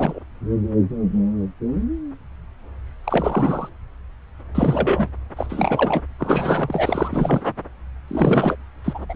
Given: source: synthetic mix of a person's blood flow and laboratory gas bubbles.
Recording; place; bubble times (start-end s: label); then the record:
Doppler ultrasound of blood flow; subclavian vein
0.00-0.19 s: bubbles
3.04-3.69 s: bubbles
4.54-5.11 s: bubbles
5.36-5.47 s: bubbles
5.49-6.03 s: bubbles
6.19-7.43 s: bubbles
8.08-8.55 s: bubbles
8.84-8.99 s: bubbles
9.09-9.16 s: bubbles
From the record:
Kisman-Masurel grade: 332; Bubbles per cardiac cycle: rolling drumbeat, 9 or more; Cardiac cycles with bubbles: 50 to 99%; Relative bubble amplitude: moderate (0.250 to 0.450); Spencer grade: 3 (all of the cardiac periods contain showers or single bubble signals, but not dominating or overriding the cardiac motion signals); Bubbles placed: anywhere in the cardiac cycle